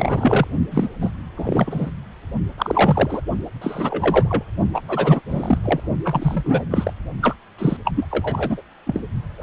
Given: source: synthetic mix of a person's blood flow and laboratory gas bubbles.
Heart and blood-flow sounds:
Doppler ultrasound of blood flow; precordium
0.00-0.47 s: bubbles
0.71-0.88 s: bubbles
1.01-1.10 s: bubbles
1.37-1.90 s: bubbles
2.58-3.21 s: bubbles
3.61-4.43 s: bubbles
4.72-4.81 s: bubbles
4.88-5.21 s: bubbles
5.29-5.58 s: bubbles
5.64-5.80 s: bubbles
6.04-6.63 s: bubbles
6.71-6.93 s: bubbles
7.21-7.35 s: bubbles
7.58-7.77 s: bubbles
7.85-7.91 s: bubbles
7.95-8.05 s: bubbles
8.11-8.62 s: bubbles
8.86-9.00 s: bubbles
9.38-9.43 s: bubbles
From the record:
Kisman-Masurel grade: 342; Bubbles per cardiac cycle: rolling drumbeat, 9 or more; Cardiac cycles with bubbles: 100%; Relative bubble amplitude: moderate (0.250 to 0.450); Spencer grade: 3 (all of the cardiac periods contain showers or single bubble signals, but not dominating or overriding the cardiac motion signals); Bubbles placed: only in the low amplitude regions of the cardiac cycle

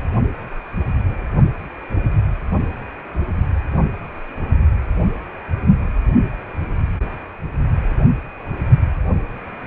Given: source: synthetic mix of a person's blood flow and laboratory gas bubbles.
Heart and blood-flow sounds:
Doppler ultrasound of blood flow; precordium
no bubbles
From the record:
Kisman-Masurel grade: 000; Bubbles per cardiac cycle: 0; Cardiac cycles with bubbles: 0%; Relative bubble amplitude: no bubbles discernible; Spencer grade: 0 (complete lack of bubble signals)

